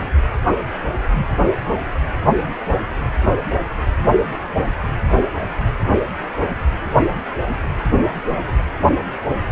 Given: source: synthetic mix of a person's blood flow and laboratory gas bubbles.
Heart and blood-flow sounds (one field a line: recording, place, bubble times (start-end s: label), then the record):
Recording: Doppler ultrasound of blood flow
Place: precordium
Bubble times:
no bubbles
From the record:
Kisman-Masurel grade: 000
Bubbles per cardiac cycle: 0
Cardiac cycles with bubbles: 0%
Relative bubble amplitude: no bubbles discernible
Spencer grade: 0 (complete lack of bubble signals)